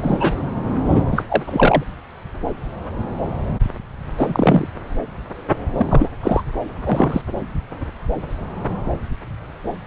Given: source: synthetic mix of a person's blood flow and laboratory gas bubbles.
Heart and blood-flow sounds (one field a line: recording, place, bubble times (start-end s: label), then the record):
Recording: Doppler ultrasound of blood flow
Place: subclavian vein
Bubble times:
0.00-0.50 s: bubbles
0.89-1.03 s: bubbles
1.11-1.23 s: bubbles
1.28-1.43 s: bubbles
1.45-1.83 s: bubbles
4.18-4.68 s: bubbles
5.77-5.87 s: bubbles
5.90-6.12 s: bubbles
6.23-6.42 s: bubbles
6.83-7.22 s: bubbles
From the record:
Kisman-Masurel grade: 223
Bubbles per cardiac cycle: several, 3 to 8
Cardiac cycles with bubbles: 10 to 50%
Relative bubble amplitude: loud (0.450 to 0.775)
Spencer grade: 2 (many but less than half of the cardiac periods contain bubble signals, singularly or in groups)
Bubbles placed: anywhere in the cardiac cycle